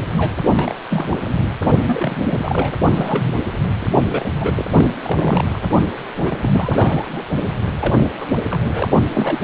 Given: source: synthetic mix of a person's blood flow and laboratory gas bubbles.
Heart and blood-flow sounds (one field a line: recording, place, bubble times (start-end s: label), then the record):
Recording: Doppler ultrasound of blood flow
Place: precordium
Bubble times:
0.17-0.34 s: bubbles
0.53-0.75 s: bubbles
0.90-1.47 s: bubbles
1.85-2.73 s: bubbles
2.94-3.38 s: bubbles
3.81-3.87 s: bubbles
4.11-4.27 s: bubbles
4.29-4.65 s: bubbles
4.72-4.87 s: bubbles
5.03-5.61 s: bubbles
6.22-6.37 s: bubbles
6.42-7.24 s: bubbles
7.79-8.05 s: bubbles
8.20-8.28 s: bubbles
8.35-8.42 s: bubbles
8.51-8.88 s: bubbles
9.10-9.41 s: bubbles
From the record:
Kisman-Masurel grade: 342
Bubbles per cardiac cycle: rolling drumbeat, 9 or more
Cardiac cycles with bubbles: 100%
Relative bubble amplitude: moderate (0.250 to 0.450)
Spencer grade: 3 (all of the cardiac periods contain showers or single bubble signals, but not dominating or overriding the cardiac motion signals)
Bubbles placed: only in the low amplitude regions of the cardiac cycle